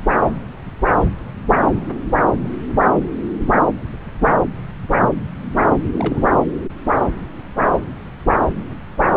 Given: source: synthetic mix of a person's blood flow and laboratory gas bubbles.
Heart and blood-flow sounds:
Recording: Doppler ultrasound of blood flow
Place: subclavian vein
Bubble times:
5.70-5.75 s: bubbles
5.96-6.29 s: bubbles
From the record:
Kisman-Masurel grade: 211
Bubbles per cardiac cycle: several, 3 to 8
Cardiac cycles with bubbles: 1 to 10%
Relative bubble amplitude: barely perceptible (0.100 to 0.250)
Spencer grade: 1 (occasional bubble signal discernible with the cardiac motion signal, with majority of cardiac periods free of bubbles)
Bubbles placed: anywhere in the cardiac cycle

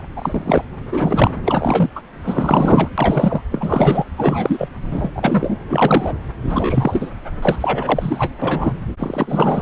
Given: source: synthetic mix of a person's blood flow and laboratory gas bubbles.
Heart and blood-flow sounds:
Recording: Doppler ultrasound of blood flow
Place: subclavian vein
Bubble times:
0.16-0.64 s: bubbles
0.92-1.31 s: bubbles
1.46-1.90 s: bubbles
1.95-2.02 s: bubbles
2.26-2.88 s: bubbles
2.98-3.42 s: bubbles
3.52-4.06 s: bubbles
4.18-4.69 s: bubbles
4.91-5.12 s: bubbles
5.16-5.57 s: bubbles
5.71-6.13 s: bubbles
6.45-7.11 s: bubbles
7.42-7.56 s: bubbles
7.61-8.30 s: bubbles
8.42-8.73 s: bubbles
8.99-9.61 s: bubbles
From the record:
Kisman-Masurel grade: 343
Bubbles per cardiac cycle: rolling drumbeat, 9 or more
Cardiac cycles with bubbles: 100%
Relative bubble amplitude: loud (0.450 to 0.775)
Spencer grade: 3 (all of the cardiac periods contain showers or single bubble signals, but not dominating or overriding the cardiac motion signals)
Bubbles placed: anywhere in the cardiac cycle

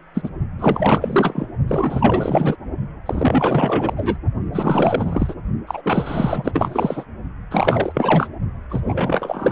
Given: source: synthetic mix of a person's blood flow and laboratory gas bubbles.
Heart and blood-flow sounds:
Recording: Doppler ultrasound of blood flow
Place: precordium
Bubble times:
0.14-0.30 s: bubbles
0.58-1.46 s: bubbles
1.67-2.56 s: bubbles
3.06-4.18 s: bubbles
4.52-5.35 s: bubbles
5.67-7.04 s: bubbles
7.50-8.29 s: bubbles
8.69-9.52 s: bubbles
From the record:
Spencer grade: 4 (maximum detectable bubble signal sounding continuously throughout systole and diastole of every cardiac period, and overriding the amplitude of the normal cardiac signals)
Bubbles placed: only in the low amplitude regions of the cardiac cycle

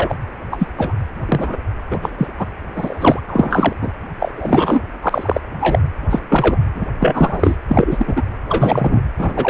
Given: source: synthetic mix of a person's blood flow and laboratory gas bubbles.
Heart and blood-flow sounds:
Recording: Doppler ultrasound of blood flow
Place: precordium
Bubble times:
0.00-0.16 s: bubbles
0.52-0.66 s: bubbles
0.78-0.94 s: bubbles
1.25-1.56 s: bubbles
1.90-1.99 s: bubbles
2.02-2.09 s: bubbles
2.17-2.27 s: bubbles
2.39-2.46 s: bubbles
2.75-3.23 s: bubbles
3.27-3.73 s: bubbles
3.81-3.91 s: bubbles
4.20-4.33 s: bubbles
4.37-4.81 s: bubbles
5.02-5.41 s: bubbles
5.61-5.79 s: bubbles
6.10-6.20 s: bubbles
6.29-6.66 s: bubbles
6.75-6.86 s: bubbles
7.00-7.56 s: bubbles
7.68-8.22 s: bubbles
8.47-9.01 s: bubbles
9.18-9.50 s: bubbles
From the record:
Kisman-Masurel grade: 243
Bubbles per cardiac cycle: several, 3 to 8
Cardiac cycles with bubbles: 100%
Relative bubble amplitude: loud (0.450 to 0.775)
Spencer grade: 3 (all of the cardiac periods contain showers or single bubble signals, but not dominating or overriding the cardiac motion signals)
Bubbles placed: anywhere in the cardiac cycle

